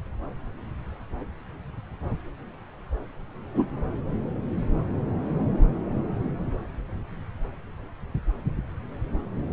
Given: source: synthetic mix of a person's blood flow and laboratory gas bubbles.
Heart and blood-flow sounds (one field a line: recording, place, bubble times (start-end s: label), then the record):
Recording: Doppler ultrasound of blood flow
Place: subclavian vein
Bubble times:
3.54-3.65 s: bubbles
From the record:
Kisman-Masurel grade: 113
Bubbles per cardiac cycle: 1 to 2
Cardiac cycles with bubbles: 1 to 10%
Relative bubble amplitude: loud (0.450 to 0.775)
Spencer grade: 1 (occasional bubble signal discernible with the cardiac motion signal, with majority of cardiac periods free of bubbles)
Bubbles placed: anywhere in the cardiac cycle